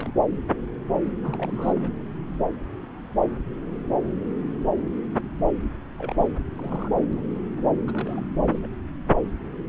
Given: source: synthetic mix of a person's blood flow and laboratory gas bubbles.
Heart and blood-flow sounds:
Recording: Doppler ultrasound of blood flow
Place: subclavian vein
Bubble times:
0.00-0.14 s: bubbles
1.23-1.90 s: bubbles
5.98-6.38 s: bubbles
6.59-7.04 s: bubbles
7.13-7.22 s: bubbles
7.35-7.44 s: bubbles
7.87-8.23 s: bubbles
8.48-8.59 s: bubbles
8.62-8.68 s: bubbles
From the record:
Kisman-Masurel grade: 221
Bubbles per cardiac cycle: several, 3 to 8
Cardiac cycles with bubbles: 10 to 50%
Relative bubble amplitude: barely perceptible (0.100 to 0.250)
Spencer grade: 2 (many but less than half of the cardiac periods contain bubble signals, singularly or in groups)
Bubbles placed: anywhere in the cardiac cycle

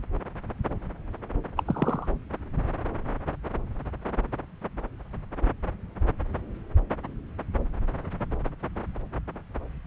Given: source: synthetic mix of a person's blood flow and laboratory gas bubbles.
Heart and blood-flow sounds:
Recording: Doppler ultrasound of blood flow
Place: subclavian vein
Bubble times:
1.57-1.63 s: bubbles
1.67-2.07 s: bubbles
From the record:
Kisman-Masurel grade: 111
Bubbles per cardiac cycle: 1 to 2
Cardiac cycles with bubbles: 1 to 10%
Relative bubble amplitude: barely perceptible (0.100 to 0.250)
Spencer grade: 1 (occasional bubble signal discernible with the cardiac motion signal, with majority of cardiac periods free of bubbles)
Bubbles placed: anywhere in the cardiac cycle

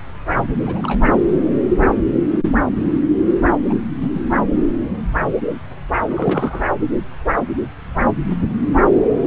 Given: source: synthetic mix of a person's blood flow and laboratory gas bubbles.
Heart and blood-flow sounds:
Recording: Doppler ultrasound of blood flow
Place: subclavian vein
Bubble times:
0.63-1.01 s: bubbles
3.70-3.74 s: bubbles
4.00-4.21 s: bubbles
6.08-6.63 s: bubbles
From the record:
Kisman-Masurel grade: 222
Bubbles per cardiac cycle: several, 3 to 8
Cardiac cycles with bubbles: 10 to 50%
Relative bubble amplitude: moderate (0.250 to 0.450)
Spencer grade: 2 (many but less than half of the cardiac periods contain bubble signals, singularly or in groups)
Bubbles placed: anywhere in the cardiac cycle

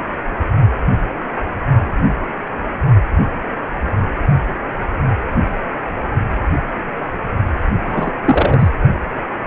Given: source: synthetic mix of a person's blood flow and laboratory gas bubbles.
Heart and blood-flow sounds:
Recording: Doppler ultrasound of blood flow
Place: precordium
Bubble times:
7.87-8.11 s: bubbles
8.25-8.69 s: bubbles
From the record:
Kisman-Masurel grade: 223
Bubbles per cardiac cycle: several, 3 to 8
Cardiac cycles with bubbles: 10 to 50%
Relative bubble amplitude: loud (0.450 to 0.775)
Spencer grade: 2 (many but less than half of the cardiac periods contain bubble signals, singularly or in groups)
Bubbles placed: anywhere in the cardiac cycle

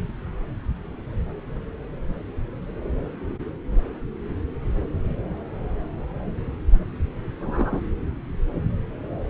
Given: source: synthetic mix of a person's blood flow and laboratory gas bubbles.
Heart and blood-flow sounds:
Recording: Doppler ultrasound of blood flow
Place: subclavian vein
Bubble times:
7.40-7.80 s: bubbles
From the record:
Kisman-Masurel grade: 112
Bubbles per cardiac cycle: 1 to 2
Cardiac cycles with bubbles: 1 to 10%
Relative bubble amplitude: moderate (0.250 to 0.450)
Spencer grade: 1 (occasional bubble signal discernible with the cardiac motion signal, with majority of cardiac periods free of bubbles)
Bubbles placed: anywhere in the cardiac cycle

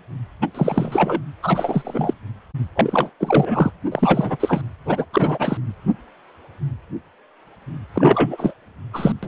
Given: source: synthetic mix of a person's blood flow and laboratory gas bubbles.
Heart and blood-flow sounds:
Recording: Doppler ultrasound of blood flow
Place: precordium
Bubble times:
0.42-0.48 s: bubbles
0.54-1.21 s: bubbles
1.43-2.13 s: bubbles
2.75-3.10 s: bubbles
3.20-3.71 s: bubbles
3.92-4.37 s: bubbles
4.40-4.62 s: bubbles
4.85-5.05 s: bubbles
5.13-5.58 s: bubbles
7.94-8.54 s: bubbles
8.93-9.12 s: bubbles
9.22-9.28 s: bubbles
From the record:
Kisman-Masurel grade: 333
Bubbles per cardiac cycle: rolling drumbeat, 9 or more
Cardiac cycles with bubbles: 50 to 99%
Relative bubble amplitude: loud (0.450 to 0.775)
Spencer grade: 3 (all of the cardiac periods contain showers or single bubble signals, but not dominating or overriding the cardiac motion signals)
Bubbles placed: anywhere in the cardiac cycle

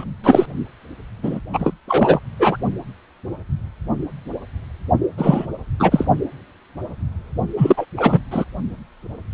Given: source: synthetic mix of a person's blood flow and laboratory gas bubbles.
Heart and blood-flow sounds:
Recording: Doppler ultrasound of blood flow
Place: precordium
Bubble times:
0.00-0.04 s: bubbles
0.23-0.46 s: bubbles
1.23-1.40 s: bubbles
1.53-1.74 s: bubbles
1.88-2.19 s: bubbles
2.39-2.57 s: bubbles
5.18-5.46 s: bubbles
5.79-6.05 s: bubbles
7.57-7.86 s: bubbles
7.96-8.20 s: bubbles
8.31-8.45 s: bubbles
From the record:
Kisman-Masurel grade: 233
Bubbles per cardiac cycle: several, 3 to 8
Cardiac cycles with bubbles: 50 to 99%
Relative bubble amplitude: loud (0.450 to 0.775)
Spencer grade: 3 (all of the cardiac periods contain showers or single bubble signals, but not dominating or overriding the cardiac motion signals)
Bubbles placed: only in the low amplitude regions of the cardiac cycle

